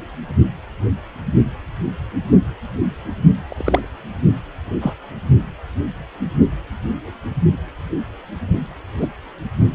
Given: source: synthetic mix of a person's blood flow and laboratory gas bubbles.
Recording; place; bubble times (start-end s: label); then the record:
Doppler ultrasound of blood flow; precordium
3.48-3.88 s: bubbles
4.80-4.93 s: bubbles
8.97-9.08 s: bubbles
From the record:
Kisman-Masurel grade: 123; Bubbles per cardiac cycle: 1 to 2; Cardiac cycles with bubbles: 10 to 50%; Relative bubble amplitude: loud (0.450 to 0.775); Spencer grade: 2 (many but less than half of the cardiac periods contain bubble signals, singularly or in groups); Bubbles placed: only in the low amplitude regions of the cardiac cycle